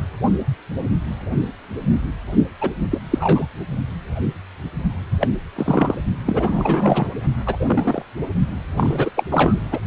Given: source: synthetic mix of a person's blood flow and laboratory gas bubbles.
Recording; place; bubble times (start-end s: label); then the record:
Doppler ultrasound of blood flow; precordium
2.61-2.70 s: bubbles
2.91-2.98 s: bubbles
3.10-3.48 s: bubbles
5.21-5.28 s: bubbles
5.55-5.95 s: bubbles
6.26-7.08 s: bubbles
7.46-7.57 s: bubbles
7.59-8.02 s: bubbles
8.77-9.10 s: bubbles
9.15-9.24 s: bubbles
9.31-9.61 s: bubbles
9.71-9.79 s: bubbles
From the record:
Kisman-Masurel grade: 233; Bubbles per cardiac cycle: several, 3 to 8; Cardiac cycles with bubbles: 50 to 99%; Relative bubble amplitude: loud (0.450 to 0.775); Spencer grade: 3 (all of the cardiac periods contain showers or single bubble signals, but not dominating or overriding the cardiac motion signals); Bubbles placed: only in the low amplitude regions of the cardiac cycle